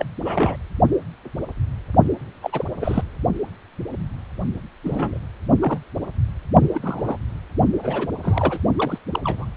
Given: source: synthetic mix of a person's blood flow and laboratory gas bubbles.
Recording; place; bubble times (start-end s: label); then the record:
Doppler ultrasound of blood flow; precordium
0.00-0.05 s: bubbles
0.25-0.56 s: bubbles
2.42-2.65 s: bubbles
2.80-3.03 s: bubbles
4.83-5.19 s: bubbles
5.60-5.79 s: bubbles
6.62-6.68 s: bubbles
6.74-7.17 s: bubbles
7.82-8.08 s: bubbles
8.23-8.60 s: bubbles
8.79-8.98 s: bubbles
9.12-9.20 s: bubbles
9.24-9.45 s: bubbles
From the record:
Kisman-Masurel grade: 232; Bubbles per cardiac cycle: several, 3 to 8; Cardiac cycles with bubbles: 50 to 99%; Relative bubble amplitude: moderate (0.250 to 0.450); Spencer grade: 3 (all of the cardiac periods contain showers or single bubble signals, but not dominating or overriding the cardiac motion signals); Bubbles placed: only in the low amplitude regions of the cardiac cycle